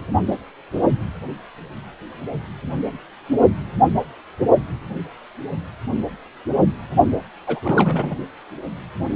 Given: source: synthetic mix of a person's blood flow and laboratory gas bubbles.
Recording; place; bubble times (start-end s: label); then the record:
Doppler ultrasound of blood flow; precordium
7.47-7.60 s: bubbles
7.64-8.15 s: bubbles
From the record:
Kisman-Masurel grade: 212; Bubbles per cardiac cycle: several, 3 to 8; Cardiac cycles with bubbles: 1 to 10%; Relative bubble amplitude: moderate (0.250 to 0.450); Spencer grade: 1 (occasional bubble signal discernible with the cardiac motion signal, with majority of cardiac periods free of bubbles); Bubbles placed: only in the low amplitude regions of the cardiac cycle